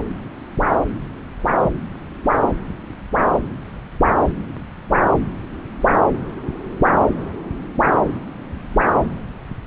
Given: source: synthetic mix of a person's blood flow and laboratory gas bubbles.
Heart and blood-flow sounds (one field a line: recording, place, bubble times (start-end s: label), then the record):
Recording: Doppler ultrasound of blood flow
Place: subclavian vein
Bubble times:
no bubbles
From the record:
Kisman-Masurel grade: 000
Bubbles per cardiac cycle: 0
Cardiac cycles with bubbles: 0%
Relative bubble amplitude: no bubbles discernible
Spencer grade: 0 (complete lack of bubble signals)